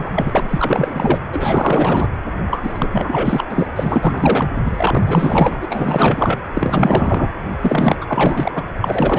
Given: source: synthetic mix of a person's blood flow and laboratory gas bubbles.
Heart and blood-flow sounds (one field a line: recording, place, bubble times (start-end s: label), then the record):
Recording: Doppler ultrasound of blood flow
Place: precordium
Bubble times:
0.00-0.10 s: bubbles
0.16-1.19 s: bubbles
1.32-2.08 s: bubbles
2.51-2.89 s: bubbles
2.92-3.44 s: bubbles
3.49-3.72 s: bubbles
3.76-4.49 s: bubbles
4.64-6.38 s: bubbles
6.54-7.28 s: bubbles
7.60-7.96 s: bubbles
8.01-8.52 s: bubbles
8.55-8.63 s: bubbles
8.84-9.19 s: bubbles
From the record:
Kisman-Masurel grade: 444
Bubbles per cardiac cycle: continuous sound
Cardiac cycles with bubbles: 100%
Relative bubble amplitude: maximal (0.775 to 0.999)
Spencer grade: 4 (maximum detectable bubble signal sounding continuously throughout systole and diastole of every cardiac period, and overriding the amplitude of the normal cardiac signals)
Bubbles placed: anywhere in the cardiac cycle